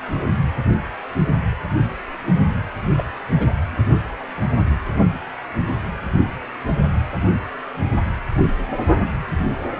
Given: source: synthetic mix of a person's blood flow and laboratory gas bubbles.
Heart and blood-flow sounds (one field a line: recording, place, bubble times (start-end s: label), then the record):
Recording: Doppler ultrasound of blood flow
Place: precordium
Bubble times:
2.97-3.03 s: bubbles
3.37-3.51 s: bubbles
8.37-8.43 s: bubbles
From the record:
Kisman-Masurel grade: 121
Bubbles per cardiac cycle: 1 to 2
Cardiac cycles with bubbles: 10 to 50%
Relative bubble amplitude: barely perceptible (0.100 to 0.250)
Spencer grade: 2 (many but less than half of the cardiac periods contain bubble signals, singularly or in groups)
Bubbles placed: anywhere in the cardiac cycle